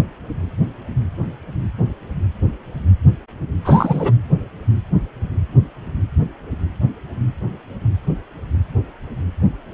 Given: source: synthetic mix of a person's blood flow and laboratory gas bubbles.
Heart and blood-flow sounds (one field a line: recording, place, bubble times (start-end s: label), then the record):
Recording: Doppler ultrasound of blood flow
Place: precordium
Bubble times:
3.65-4.13 s: bubbles
From the record:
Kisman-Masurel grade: 213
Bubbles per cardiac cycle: several, 3 to 8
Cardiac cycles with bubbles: 1 to 10%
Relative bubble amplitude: loud (0.450 to 0.775)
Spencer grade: 1 (occasional bubble signal discernible with the cardiac motion signal, with majority of cardiac periods free of bubbles)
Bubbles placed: anywhere in the cardiac cycle